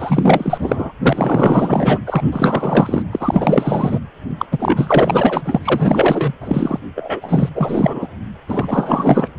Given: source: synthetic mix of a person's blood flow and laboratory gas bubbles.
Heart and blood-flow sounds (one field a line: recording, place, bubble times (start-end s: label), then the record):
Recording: Doppler ultrasound of blood flow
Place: precordium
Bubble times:
0.00-0.92 s: bubbles
1.02-1.98 s: bubbles
2.06-3.03 s: bubbles
3.11-3.99 s: bubbles
4.38-4.46 s: bubbles
4.51-5.42 s: bubbles
5.45-5.59 s: bubbles
5.62-6.33 s: bubbles
6.41-6.79 s: bubbles
6.96-7.50 s: bubbles
7.55-8.08 s: bubbles
8.48-9.29 s: bubbles
From the record:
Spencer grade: 4 (maximum detectable bubble signal sounding continuously throughout systole and diastole of every cardiac period, and overriding the amplitude of the normal cardiac signals)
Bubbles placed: anywhere in the cardiac cycle